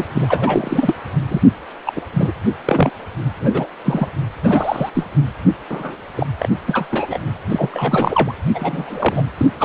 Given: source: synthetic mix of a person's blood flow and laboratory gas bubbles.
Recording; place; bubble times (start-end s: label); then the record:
Doppler ultrasound of blood flow; precordium
0.00-0.05 s: bubbles
0.15-0.93 s: bubbles
1.28-1.41 s: bubbles
1.86-1.92 s: bubbles
1.96-2.02 s: bubbles
2.12-2.32 s: bubbles
2.65-2.90 s: bubbles
3.40-3.67 s: bubbles
3.84-4.08 s: bubbles
4.44-4.89 s: bubbles
4.94-5.05 s: bubbles
5.70-5.96 s: bubbles
6.16-6.26 s: bubbles
6.39-6.49 s: bubbles
6.67-6.87 s: bubbles
6.91-7.19 s: bubbles
7.49-8.34 s: bubbles
8.55-9.24 s: bubbles
9.37-9.46 s: bubbles
9.59-9.65 s: bubbles
From the record:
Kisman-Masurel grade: 242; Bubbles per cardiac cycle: several, 3 to 8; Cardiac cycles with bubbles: 100%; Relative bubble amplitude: moderate (0.250 to 0.450); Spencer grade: 3 (all of the cardiac periods contain showers or single bubble signals, but not dominating or overriding the cardiac motion signals); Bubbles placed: anywhere in the cardiac cycle